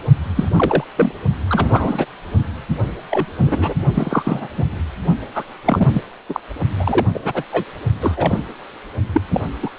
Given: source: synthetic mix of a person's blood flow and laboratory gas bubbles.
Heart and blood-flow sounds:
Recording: Doppler ultrasound of blood flow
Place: precordium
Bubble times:
0.35-0.49 s: bubbles
0.56-0.84 s: bubbles
0.96-1.12 s: bubbles
1.49-2.06 s: bubbles
3.10-3.26 s: bubbles
3.38-3.74 s: bubbles
3.94-4.48 s: bubbles
4.57-4.64 s: bubbles
5.35-5.44 s: bubbles
5.66-5.88 s: bubbles
5.93-6.02 s: bubbles
6.29-6.40 s: bubbles
6.80-7.06 s: bubbles
7.14-7.20 s: bubbles
7.25-7.44 s: bubbles
7.52-7.64 s: bubbles
8.00-8.42 s: bubbles
9.12-9.21 s: bubbles
9.29-9.40 s: bubbles
9.62-9.70 s: bubbles
From the record:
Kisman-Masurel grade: 243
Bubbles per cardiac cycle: several, 3 to 8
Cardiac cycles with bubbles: 100%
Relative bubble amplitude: loud (0.450 to 0.775)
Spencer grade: 3 (all of the cardiac periods contain showers or single bubble signals, but not dominating or overriding the cardiac motion signals)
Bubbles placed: only in the low amplitude regions of the cardiac cycle

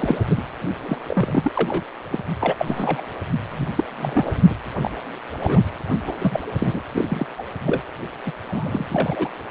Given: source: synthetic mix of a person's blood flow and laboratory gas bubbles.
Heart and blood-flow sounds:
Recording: Doppler ultrasound of blood flow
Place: precordium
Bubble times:
0.00-0.17 s: bubbles
0.30-0.43 s: bubbles
0.82-0.97 s: bubbles
1.07-1.52 s: bubbles
1.55-1.84 s: bubbles
2.10-2.20 s: bubbles
2.39-3.03 s: bubbles
3.50-3.68 s: bubbles
3.77-3.84 s: bubbles
4.00-4.32 s: bubbles
4.50-4.54 s: bubbles
4.78-4.91 s: bubbles
5.40-5.61 s: bubbles
6.07-6.13 s: bubbles
6.19-6.40 s: bubbles
6.58-6.80 s: bubbles
6.92-7.05 s: bubbles
7.08-7.26 s: bubbles
7.38-7.44 s: bubbles
7.66-7.82 s: bubbles
8.26-8.31 s: bubbles
8.46-9.29 s: bubbles
From the record:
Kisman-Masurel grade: 242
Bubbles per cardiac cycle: several, 3 to 8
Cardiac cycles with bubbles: 100%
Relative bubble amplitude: moderate (0.250 to 0.450)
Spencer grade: 3 (all of the cardiac periods contain showers or single bubble signals, but not dominating or overriding the cardiac motion signals)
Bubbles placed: anywhere in the cardiac cycle

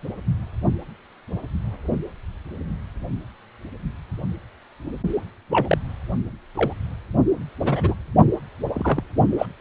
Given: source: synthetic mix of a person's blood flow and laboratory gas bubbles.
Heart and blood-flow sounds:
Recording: Doppler ultrasound of blood flow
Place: precordium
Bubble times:
5.50-5.77 s: bubbles
6.55-6.73 s: bubbles
7.62-7.95 s: bubbles
8.73-9.04 s: bubbles
9.38-9.46 s: bubbles
From the record:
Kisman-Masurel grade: 123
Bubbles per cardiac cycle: 1 to 2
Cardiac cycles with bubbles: 10 to 50%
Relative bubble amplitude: loud (0.450 to 0.775)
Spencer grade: 2 (many but less than half of the cardiac periods contain bubble signals, singularly or in groups)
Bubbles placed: only in the low amplitude regions of the cardiac cycle

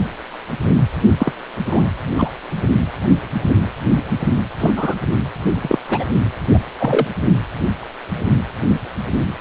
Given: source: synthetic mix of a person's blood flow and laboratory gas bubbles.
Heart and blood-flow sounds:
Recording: Doppler ultrasound of blood flow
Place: precordium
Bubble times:
1.19-1.32 s: bubbles
1.65-1.84 s: bubbles
2.18-2.29 s: bubbles
4.60-4.71 s: bubbles
4.76-4.95 s: bubbles
5.62-5.77 s: bubbles
5.88-6.04 s: bubbles
6.53-6.59 s: bubbles
6.79-7.07 s: bubbles
From the record:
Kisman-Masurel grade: 223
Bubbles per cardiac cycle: several, 3 to 8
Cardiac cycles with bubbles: 10 to 50%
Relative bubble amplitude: loud (0.450 to 0.775)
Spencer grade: 2 (many but less than half of the cardiac periods contain bubble signals, singularly or in groups)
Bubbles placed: only in the low amplitude regions of the cardiac cycle

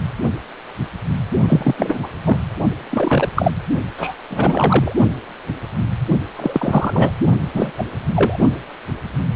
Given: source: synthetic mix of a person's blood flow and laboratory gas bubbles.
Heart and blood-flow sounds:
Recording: Doppler ultrasound of blood flow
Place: precordium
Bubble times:
1.48-1.99 s: bubbles
2.02-2.08 s: bubbles
2.25-2.38 s: bubbles
2.90-3.29 s: bubbles
3.36-3.51 s: bubbles
3.98-4.16 s: bubbles
4.30-4.96 s: bubbles
6.36-7.14 s: bubbles
7.54-7.72 s: bubbles
7.77-7.84 s: bubbles
8.15-8.38 s: bubbles
From the record:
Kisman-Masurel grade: 223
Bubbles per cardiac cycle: several, 3 to 8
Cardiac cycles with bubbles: 10 to 50%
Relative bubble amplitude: loud (0.450 to 0.775)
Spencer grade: 2 (many but less than half of the cardiac periods contain bubble signals, singularly or in groups)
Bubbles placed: only in the low amplitude regions of the cardiac cycle

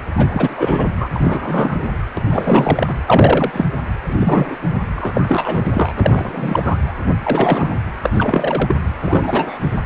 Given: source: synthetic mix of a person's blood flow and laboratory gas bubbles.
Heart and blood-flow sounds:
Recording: Doppler ultrasound of blood flow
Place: precordium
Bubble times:
0.17-0.86 s: bubbles
0.99-1.08 s: bubbles
1.15-1.82 s: bubbles
2.17-2.22 s: bubbles
2.30-2.95 s: bubbles
3.06-3.66 s: bubbles
4.08-4.57 s: bubbles
4.96-5.71 s: bubbles
5.73-5.93 s: bubbles
5.96-6.94 s: bubbles
7.24-7.76 s: bubbles
8.03-8.10 s: bubbles
8.13-8.74 s: bubbles
8.98-9.79 s: bubbles
From the record:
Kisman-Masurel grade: 333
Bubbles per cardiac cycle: rolling drumbeat, 9 or more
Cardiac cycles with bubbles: 50 to 99%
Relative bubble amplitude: loud (0.450 to 0.775)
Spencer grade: 3 (all of the cardiac periods contain showers or single bubble signals, but not dominating or overriding the cardiac motion signals)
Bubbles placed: anywhere in the cardiac cycle

